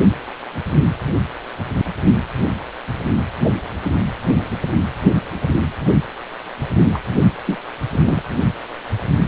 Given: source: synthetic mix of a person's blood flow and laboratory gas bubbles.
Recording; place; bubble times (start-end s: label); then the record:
Doppler ultrasound of blood flow; precordium
6.93-6.99 s: bubbles
7.46-7.58 s: bubbles
7.92-8.22 s: bubbles
From the record:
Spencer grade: 1 (occasional bubble signal discernible with the cardiac motion signal, with majority of cardiac periods free of bubbles); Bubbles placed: anywhere in the cardiac cycle